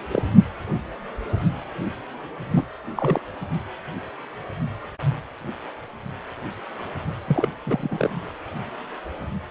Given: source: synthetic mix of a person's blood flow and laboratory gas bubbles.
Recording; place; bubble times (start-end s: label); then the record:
Doppler ultrasound of blood flow; precordium
0.12-0.22 s: bubbles
2.50-2.65 s: bubbles
2.96-3.21 s: bubbles
7.27-7.49 s: bubbles
7.66-8.10 s: bubbles
From the record:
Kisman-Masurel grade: 222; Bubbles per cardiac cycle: several, 3 to 8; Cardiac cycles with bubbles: 10 to 50%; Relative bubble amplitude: moderate (0.250 to 0.450); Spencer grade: 2 (many but less than half of the cardiac periods contain bubble signals, singularly or in groups); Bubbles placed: only in the low amplitude regions of the cardiac cycle